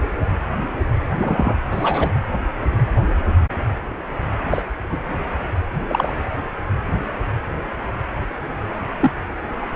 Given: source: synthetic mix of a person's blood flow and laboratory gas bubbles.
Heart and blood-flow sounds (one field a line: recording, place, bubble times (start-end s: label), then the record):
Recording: Doppler ultrasound of blood flow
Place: precordium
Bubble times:
1.18-1.54 s: bubbles
1.71-2.09 s: bubbles
4.51-4.62 s: bubbles
4.90-4.98 s: bubbles
5.89-6.12 s: bubbles
8.99-9.11 s: bubbles
From the record:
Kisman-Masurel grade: 122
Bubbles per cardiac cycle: 1 to 2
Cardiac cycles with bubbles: 10 to 50%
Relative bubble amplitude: moderate (0.250 to 0.450)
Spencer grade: 2 (many but less than half of the cardiac periods contain bubble signals, singularly or in groups)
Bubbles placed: anywhere in the cardiac cycle